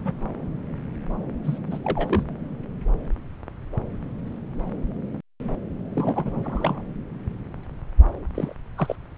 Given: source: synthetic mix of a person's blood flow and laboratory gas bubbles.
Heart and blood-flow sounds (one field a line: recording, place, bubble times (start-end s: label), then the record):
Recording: Doppler ultrasound of blood flow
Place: subclavian vein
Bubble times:
0.05-0.12 s: bubbles
1.44-1.58 s: bubbles
1.71-1.78 s: bubbles
1.83-2.23 s: bubbles
5.94-6.82 s: bubbles
8.35-8.54 s: bubbles
8.76-8.96 s: bubbles
From the record:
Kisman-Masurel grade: 221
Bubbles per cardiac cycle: several, 3 to 8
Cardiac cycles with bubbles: 10 to 50%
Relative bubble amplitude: barely perceptible (0.100 to 0.250)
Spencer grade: 2 (many but less than half of the cardiac periods contain bubble signals, singularly or in groups)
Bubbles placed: anywhere in the cardiac cycle